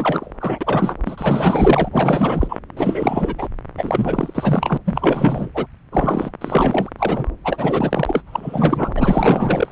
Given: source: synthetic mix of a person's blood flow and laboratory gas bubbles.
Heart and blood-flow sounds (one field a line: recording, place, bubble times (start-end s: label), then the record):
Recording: Doppler ultrasound of blood flow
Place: subclavian vein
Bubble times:
0.00-0.32 s: bubbles
0.40-0.94 s: bubbles
1.05-2.59 s: bubbles
2.77-3.48 s: bubbles
3.77-4.77 s: bubbles
4.85-5.51 s: bubbles
5.54-5.67 s: bubbles
5.92-6.31 s: bubbles
6.41-6.89 s: bubbles
6.98-7.29 s: bubbles
7.44-8.23 s: bubbles
8.26-8.93 s: bubbles
8.96-9.72 s: bubbles
From the record:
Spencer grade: 4 (maximum detectable bubble signal sounding continuously throughout systole and diastole of every cardiac period, and overriding the amplitude of the normal cardiac signals)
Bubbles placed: anywhere in the cardiac cycle